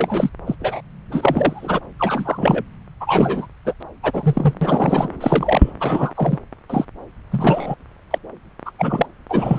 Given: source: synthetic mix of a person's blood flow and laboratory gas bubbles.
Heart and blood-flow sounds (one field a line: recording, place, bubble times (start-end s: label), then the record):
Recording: Doppler ultrasound of blood flow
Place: subclavian vein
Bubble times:
0.00-0.30 s: bubbles
0.47-0.56 s: bubbles
0.59-0.81 s: bubbles
1.12-1.79 s: bubbles
1.99-2.64 s: bubbles
3.00-3.46 s: bubbles
3.65-3.74 s: bubbles
3.80-3.83 s: bubbles
4.02-4.54 s: bubbles
4.61-5.10 s: bubbles
5.21-5.71 s: bubbles
5.80-6.12 s: bubbles
6.15-6.38 s: bubbles
6.70-6.85 s: bubbles
7.31-7.75 s: bubbles
8.11-8.19 s: bubbles
8.66-8.72 s: bubbles
8.79-9.06 s: bubbles
9.29-9.59 s: bubbles
From the record:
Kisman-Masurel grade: 242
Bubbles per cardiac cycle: several, 3 to 8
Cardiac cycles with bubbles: 100%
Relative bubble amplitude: moderate (0.250 to 0.450)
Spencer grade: 3 (all of the cardiac periods contain showers or single bubble signals, but not dominating or overriding the cardiac motion signals)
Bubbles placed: anywhere in the cardiac cycle